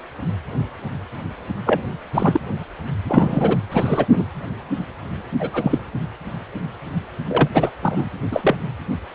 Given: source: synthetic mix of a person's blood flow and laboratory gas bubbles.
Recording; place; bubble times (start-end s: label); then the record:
Doppler ultrasound of blood flow; precordium
1.66-1.81 s: bubbles
2.13-2.40 s: bubbles
3.08-3.58 s: bubbles
3.71-4.06 s: bubbles
4.10-4.25 s: bubbles
5.39-5.79 s: bubbles
7.29-7.48 s: bubbles
7.54-7.70 s: bubbles
7.82-8.08 s: bubbles
8.31-8.56 s: bubbles
From the record:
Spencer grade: 2 (many but less than half of the cardiac periods contain bubble signals, singularly or in groups); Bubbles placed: anywhere in the cardiac cycle